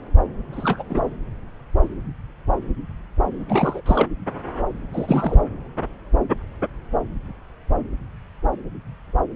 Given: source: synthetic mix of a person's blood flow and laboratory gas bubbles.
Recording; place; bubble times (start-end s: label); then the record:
Doppler ultrasound of blood flow; subclavian vein
0.52-0.83 s: bubbles
0.89-1.01 s: bubbles
3.49-3.81 s: bubbles
3.85-4.07 s: bubbles
4.93-5.43 s: bubbles
From the record:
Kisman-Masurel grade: 222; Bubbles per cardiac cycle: several, 3 to 8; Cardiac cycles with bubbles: 10 to 50%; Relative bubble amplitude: moderate (0.250 to 0.450); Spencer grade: 2 (many but less than half of the cardiac periods contain bubble signals, singularly or in groups); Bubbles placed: anywhere in the cardiac cycle